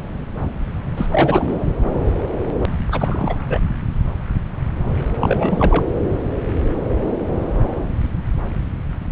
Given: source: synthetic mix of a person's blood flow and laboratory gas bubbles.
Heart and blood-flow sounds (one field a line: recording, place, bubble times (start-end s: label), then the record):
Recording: Doppler ultrasound of blood flow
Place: subclavian vein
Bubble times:
0.96-1.08 s: bubbles
1.10-1.66 s: bubbles
2.92-3.38 s: bubbles
3.46-3.66 s: bubbles
5.21-5.86 s: bubbles
From the record:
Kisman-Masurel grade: 223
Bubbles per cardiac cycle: several, 3 to 8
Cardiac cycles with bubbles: 10 to 50%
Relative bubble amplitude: loud (0.450 to 0.775)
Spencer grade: 2 (many but less than half of the cardiac periods contain bubble signals, singularly or in groups)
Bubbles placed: anywhere in the cardiac cycle